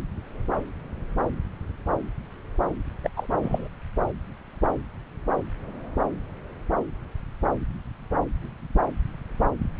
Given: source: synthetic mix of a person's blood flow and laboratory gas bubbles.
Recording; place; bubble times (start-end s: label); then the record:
Doppler ultrasound of blood flow; subclavian vein
3.04-3.10 s: bubbles
3.17-3.27 s: bubbles
3.43-3.69 s: bubbles
From the record:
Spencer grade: 1 (occasional bubble signal discernible with the cardiac motion signal, with majority of cardiac periods free of bubbles); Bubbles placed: anywhere in the cardiac cycle